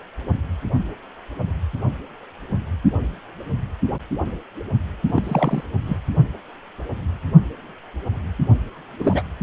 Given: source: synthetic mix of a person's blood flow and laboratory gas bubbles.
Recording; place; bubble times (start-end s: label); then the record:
Doppler ultrasound of blood flow; precordium
5.09-5.63 s: bubbles
5.85-5.97 s: bubbles
8.99-9.23 s: bubbles
From the record:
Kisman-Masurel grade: 222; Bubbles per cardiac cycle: several, 3 to 8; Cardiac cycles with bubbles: 10 to 50%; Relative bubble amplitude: moderate (0.250 to 0.450); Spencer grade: 2 (many but less than half of the cardiac periods contain bubble signals, singularly or in groups); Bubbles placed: anywhere in the cardiac cycle